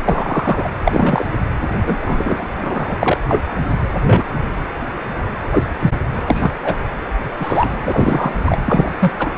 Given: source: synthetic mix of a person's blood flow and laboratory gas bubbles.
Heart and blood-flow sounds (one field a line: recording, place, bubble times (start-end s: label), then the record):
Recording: Doppler ultrasound of blood flow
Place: precordium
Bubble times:
0.04-0.69 s: bubbles
0.84-1.26 s: bubbles
1.86-1.98 s: bubbles
2.04-2.48 s: bubbles
2.62-2.96 s: bubbles
3.00-3.17 s: bubbles
3.29-3.44 s: bubbles
4.06-4.24 s: bubbles
5.50-5.63 s: bubbles
5.79-5.91 s: bubbles
6.26-6.52 s: bubbles
6.63-6.76 s: bubbles
7.38-7.69 s: bubbles
7.84-8.34 s: bubbles
8.45-8.58 s: bubbles
8.65-8.92 s: bubbles
8.99-9.11 s: bubbles
9.19-9.30 s: bubbles
From the record:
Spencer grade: 3 (all of the cardiac periods contain showers or single bubble signals, but not dominating or overriding the cardiac motion signals)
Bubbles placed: anywhere in the cardiac cycle